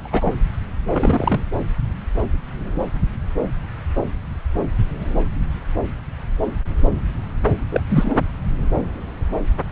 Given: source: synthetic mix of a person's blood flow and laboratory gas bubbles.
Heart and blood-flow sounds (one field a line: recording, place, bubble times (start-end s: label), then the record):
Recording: Doppler ultrasound of blood flow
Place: subclavian vein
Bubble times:
0.04-0.34 s: bubbles
0.87-1.44 s: bubbles
7.71-7.82 s: bubbles
7.88-8.16 s: bubbles
From the record:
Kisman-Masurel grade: 222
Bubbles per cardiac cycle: several, 3 to 8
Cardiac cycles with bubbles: 10 to 50%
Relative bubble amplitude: moderate (0.250 to 0.450)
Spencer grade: 2 (many but less than half of the cardiac periods contain bubble signals, singularly or in groups)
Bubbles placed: anywhere in the cardiac cycle